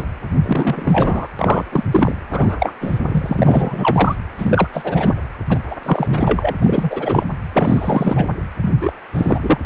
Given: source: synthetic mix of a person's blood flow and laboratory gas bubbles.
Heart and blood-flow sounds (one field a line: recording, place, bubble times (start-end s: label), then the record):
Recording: Doppler ultrasound of blood flow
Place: precordium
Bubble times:
0.00-0.05 s: bubbles
0.43-1.28 s: bubbles
1.39-1.63 s: bubbles
1.71-1.83 s: bubbles
1.91-2.15 s: bubbles
2.30-2.73 s: bubbles
2.80-2.99 s: bubbles
3.08-4.16 s: bubbles
4.38-4.67 s: bubbles
4.72-5.14 s: bubbles
5.49-5.59 s: bubbles
5.71-5.76 s: bubbles
5.83-6.54 s: bubbles
6.62-7.25 s: bubbles
7.52-8.27 s: bubbles
8.62-8.73 s: bubbles
8.78-8.93 s: bubbles
9.12-9.40 s: bubbles
9.43-9.58 s: bubbles
From the record:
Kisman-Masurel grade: 343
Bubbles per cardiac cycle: rolling drumbeat, 9 or more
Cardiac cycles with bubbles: 100%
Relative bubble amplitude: loud (0.450 to 0.775)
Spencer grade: 3 (all of the cardiac periods contain showers or single bubble signals, but not dominating or overriding the cardiac motion signals)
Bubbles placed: anywhere in the cardiac cycle